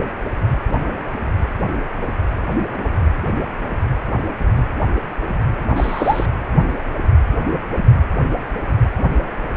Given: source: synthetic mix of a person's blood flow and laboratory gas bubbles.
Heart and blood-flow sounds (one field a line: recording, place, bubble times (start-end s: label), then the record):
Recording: Doppler ultrasound of blood flow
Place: precordium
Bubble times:
5.76-6.26 s: bubbles
From the record:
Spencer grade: 1 (occasional bubble signal discernible with the cardiac motion signal, with majority of cardiac periods free of bubbles)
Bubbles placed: anywhere in the cardiac cycle